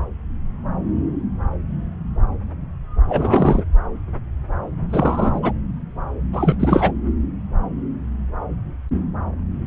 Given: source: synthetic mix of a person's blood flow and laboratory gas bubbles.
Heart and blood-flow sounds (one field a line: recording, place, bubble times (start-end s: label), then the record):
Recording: Doppler ultrasound of blood flow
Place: subclavian vein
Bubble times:
3.08-3.64 s: bubbles
4.90-5.54 s: bubbles
6.33-6.56 s: bubbles
6.60-6.92 s: bubbles
From the record:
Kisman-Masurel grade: 223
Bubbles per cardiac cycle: several, 3 to 8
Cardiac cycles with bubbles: 10 to 50%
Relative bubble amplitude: loud (0.450 to 0.775)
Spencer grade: 2 (many but less than half of the cardiac periods contain bubble signals, singularly or in groups)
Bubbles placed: anywhere in the cardiac cycle